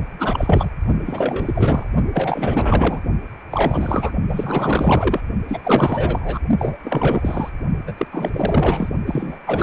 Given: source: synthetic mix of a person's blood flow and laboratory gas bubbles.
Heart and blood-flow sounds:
Doppler ultrasound of blood flow; precordium
0.18-0.72 s: bubbles
1.06-1.91 s: bubbles
2.13-3.01 s: bubbles
3.51-4.12 s: bubbles
4.29-5.21 s: bubbles
5.48-6.40 s: bubbles
6.58-6.77 s: bubbles
6.84-7.50 s: bubbles
7.87-7.93 s: bubbles
7.97-8.07 s: bubbles
8.12-8.89 s: bubbles
9.06-9.40 s: bubbles
9.46-9.63 s: bubbles
From the record:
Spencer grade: 4 (maximum detectable bubble signal sounding continuously throughout systole and diastole of every cardiac period, and overriding the amplitude of the normal cardiac signals); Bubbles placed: only in the low amplitude regions of the cardiac cycle

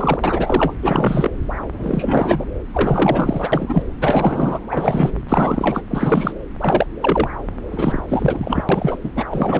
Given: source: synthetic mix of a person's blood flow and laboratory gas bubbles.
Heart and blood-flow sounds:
Doppler ultrasound of blood flow; subclavian vein
0.00-0.73 s: bubbles
0.82-1.30 s: bubbles
1.73-2.45 s: bubbles
2.73-3.84 s: bubbles
4.01-4.60 s: bubbles
4.70-5.13 s: bubbles
5.29-5.82 s: bubbles
5.89-6.32 s: bubbles
6.60-6.86 s: bubbles
7.01-7.29 s: bubbles
7.71-8.02 s: bubbles
8.08-8.64 s: bubbles
8.69-8.97 s: bubbles
9.04-9.11 s: bubbles
9.16-9.25 s: bubbles
9.30-9.59 s: bubbles
From the record:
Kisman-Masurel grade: 343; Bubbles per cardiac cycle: rolling drumbeat, 9 or more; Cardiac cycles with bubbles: 100%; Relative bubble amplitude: loud (0.450 to 0.775); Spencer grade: 3 (all of the cardiac periods contain showers or single bubble signals, but not dominating or overriding the cardiac motion signals); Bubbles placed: anywhere in the cardiac cycle

